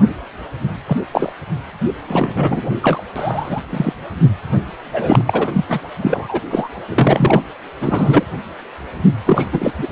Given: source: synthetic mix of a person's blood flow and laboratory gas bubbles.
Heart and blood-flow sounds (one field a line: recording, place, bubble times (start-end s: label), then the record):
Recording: Doppler ultrasound of blood flow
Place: precordium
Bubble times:
0.87-0.96 s: bubbles
1.11-1.32 s: bubbles
2.08-2.74 s: bubbles
2.82-3.02 s: bubbles
3.15-3.60 s: bubbles
3.69-3.93 s: bubbles
4.93-5.23 s: bubbles
5.26-5.65 s: bubbles
5.69-5.80 s: bubbles
6.00-6.41 s: bubbles
6.50-6.69 s: bubbles
6.89-7.42 s: bubbles
7.81-8.23 s: bubbles
9.25-9.47 s: bubbles
9.52-9.72 s: bubbles
9.78-9.88 s: bubbles
From the record:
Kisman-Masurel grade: 233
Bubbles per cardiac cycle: several, 3 to 8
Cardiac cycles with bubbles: 50 to 99%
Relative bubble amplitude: loud (0.450 to 0.775)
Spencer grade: 3 (all of the cardiac periods contain showers or single bubble signals, but not dominating or overriding the cardiac motion signals)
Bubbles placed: anywhere in the cardiac cycle